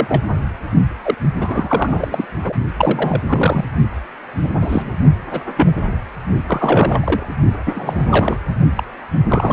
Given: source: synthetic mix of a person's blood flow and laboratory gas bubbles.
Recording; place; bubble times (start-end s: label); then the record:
Doppler ultrasound of blood flow; precordium
0.00-0.24 s: bubbles
1.03-1.15 s: bubbles
1.36-2.26 s: bubbles
2.42-2.53 s: bubbles
2.77-3.22 s: bubbles
3.29-3.65 s: bubbles
4.42-4.50 s: bubbles
4.54-4.90 s: bubbles
5.31-5.41 s: bubbles
5.56-5.72 s: bubbles
6.47-7.26 s: bubbles
7.66-8.39 s: bubbles
8.75-8.83 s: bubbles
9.29-9.53 s: bubbles
From the record:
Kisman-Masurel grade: 243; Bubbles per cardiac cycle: several, 3 to 8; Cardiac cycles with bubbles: 100%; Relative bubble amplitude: loud (0.450 to 0.775); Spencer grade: 3 (all of the cardiac periods contain showers or single bubble signals, but not dominating or overriding the cardiac motion signals); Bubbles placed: only in the low amplitude regions of the cardiac cycle